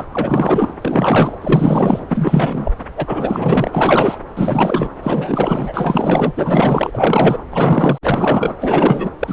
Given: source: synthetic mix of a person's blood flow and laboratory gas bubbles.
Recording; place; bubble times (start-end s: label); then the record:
Doppler ultrasound of blood flow; subclavian vein
0.00-0.04 s: bubbles
0.11-0.74 s: bubbles
0.82-1.36 s: bubbles
1.41-2.00 s: bubbles
2.08-2.70 s: bubbles
2.97-4.17 s: bubbles
4.36-4.89 s: bubbles
5.03-6.32 s: bubbles
6.35-7.44 s: bubbles
7.50-7.98 s: bubbles
8.03-8.54 s: bubbles
8.60-9.10 s: bubbles
9.20-9.32 s: bubbles
From the record:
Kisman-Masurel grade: 444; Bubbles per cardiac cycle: continuous sound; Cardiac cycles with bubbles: 100%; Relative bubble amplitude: maximal (0.775 to 0.999); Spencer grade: 4 (maximum detectable bubble signal sounding continuously throughout systole and diastole of every cardiac period, and overriding the amplitude of the normal cardiac signals); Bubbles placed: anywhere in the cardiac cycle